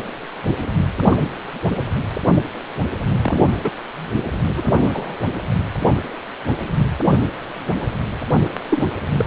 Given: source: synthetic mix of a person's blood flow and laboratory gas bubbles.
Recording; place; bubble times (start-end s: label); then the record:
Doppler ultrasound of blood flow; precordium
1.09-1.18 s: bubbles
3.21-3.47 s: bubbles
3.63-3.71 s: bubbles
4.56-4.62 s: bubbles
4.65-5.15 s: bubbles
8.69-8.88 s: bubbles
9.18-9.25 s: bubbles
From the record:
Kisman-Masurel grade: 122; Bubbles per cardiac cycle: 1 to 2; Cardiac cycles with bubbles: 10 to 50%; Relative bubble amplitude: moderate (0.250 to 0.450); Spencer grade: 2 (many but less than half of the cardiac periods contain bubble signals, singularly or in groups); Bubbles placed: anywhere in the cardiac cycle